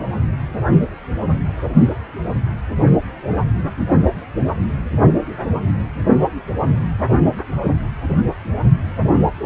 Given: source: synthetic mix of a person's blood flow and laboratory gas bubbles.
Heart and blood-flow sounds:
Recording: Doppler ultrasound of blood flow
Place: precordium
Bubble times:
no bubbles
From the record:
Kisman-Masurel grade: 000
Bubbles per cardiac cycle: 0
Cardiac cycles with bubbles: 0%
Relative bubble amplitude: no bubbles discernible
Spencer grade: 0 (complete lack of bubble signals)

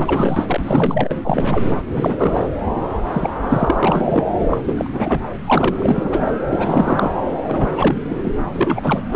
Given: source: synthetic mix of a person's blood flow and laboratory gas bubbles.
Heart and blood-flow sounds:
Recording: Doppler ultrasound of blood flow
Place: subclavian vein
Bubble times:
0.00-0.60 s: bubbles
0.63-1.16 s: bubbles
1.24-1.71 s: bubbles
1.88-2.46 s: bubbles
3.04-3.33 s: bubbles
3.42-3.75 s: bubbles
3.83-4.24 s: bubbles
4.50-4.58 s: bubbles
4.64-5.20 s: bubbles
5.33-5.36 s: bubbles
5.46-5.76 s: bubbles
5.79-6.22 s: bubbles
6.26-6.32 s: bubbles
6.50-7.17 s: bubbles
7.47-7.74 s: bubbles
7.77-8.16 s: bubbles
8.24-8.34 s: bubbles
8.54-9.03 s: bubbles
9.12-9.16 s: bubbles
From the record:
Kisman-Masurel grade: 343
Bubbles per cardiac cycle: rolling drumbeat, 9 or more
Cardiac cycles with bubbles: 100%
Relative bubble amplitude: loud (0.450 to 0.775)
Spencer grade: 3 (all of the cardiac periods contain showers or single bubble signals, but not dominating or overriding the cardiac motion signals)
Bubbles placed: anywhere in the cardiac cycle

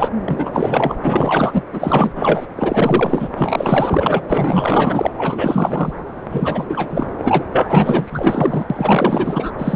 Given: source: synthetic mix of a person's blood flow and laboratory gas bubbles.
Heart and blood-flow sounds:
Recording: Doppler ultrasound of blood flow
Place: subclavian vein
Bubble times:
0.00-0.09 s: bubbles
0.24-0.96 s: bubbles
1.02-1.62 s: bubbles
1.72-2.47 s: bubbles
2.56-3.29 s: bubbles
3.36-4.21 s: bubbles
4.28-5.11 s: bubbles
5.17-5.92 s: bubbles
6.31-6.65 s: bubbles
6.69-7.08 s: bubbles
7.18-7.45 s: bubbles
7.52-8.65 s: bubbles
8.70-9.50 s: bubbles
9.58-9.76 s: bubbles
From the record:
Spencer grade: 4 (maximum detectable bubble signal sounding continuously throughout systole and diastole of every cardiac period, and overriding the amplitude of the normal cardiac signals)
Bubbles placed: anywhere in the cardiac cycle

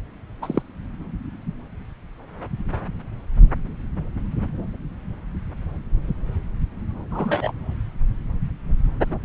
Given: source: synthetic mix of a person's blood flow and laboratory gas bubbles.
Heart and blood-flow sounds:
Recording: Doppler ultrasound of blood flow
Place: subclavian vein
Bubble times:
0.41-0.62 s: bubbles
7.11-7.51 s: bubbles
From the record:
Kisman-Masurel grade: 122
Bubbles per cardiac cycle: 1 to 2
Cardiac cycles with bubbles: 10 to 50%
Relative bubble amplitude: moderate (0.250 to 0.450)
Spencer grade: 2 (many but less than half of the cardiac periods contain bubble signals, singularly or in groups)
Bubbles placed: anywhere in the cardiac cycle

